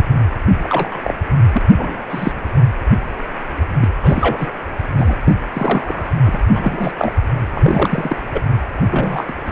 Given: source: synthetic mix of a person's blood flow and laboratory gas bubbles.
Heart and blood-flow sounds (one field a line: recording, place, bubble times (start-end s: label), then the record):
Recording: Doppler ultrasound of blood flow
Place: precordium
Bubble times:
0.47-0.53 s: bubbles
0.63-1.01 s: bubbles
1.03-1.14 s: bubbles
1.52-1.62 s: bubbles
1.77-1.97 s: bubbles
2.10-2.32 s: bubbles
3.77-3.88 s: bubbles
4.03-4.49 s: bubbles
4.98-5.16 s: bubbles
5.24-5.35 s: bubbles
5.53-6.07 s: bubbles
6.24-6.41 s: bubbles
6.54-6.92 s: bubbles
6.98-7.14 s: bubbles
7.54-8.16 s: bubbles
8.33-8.43 s: bubbles
8.89-9.24 s: bubbles
9.28-9.33 s: bubbles
9.45-9.51 s: bubbles
From the record:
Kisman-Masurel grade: 232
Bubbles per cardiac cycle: several, 3 to 8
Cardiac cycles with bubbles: 50 to 99%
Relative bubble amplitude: moderate (0.250 to 0.450)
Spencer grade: 3 (all of the cardiac periods contain showers or single bubble signals, but not dominating or overriding the cardiac motion signals)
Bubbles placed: anywhere in the cardiac cycle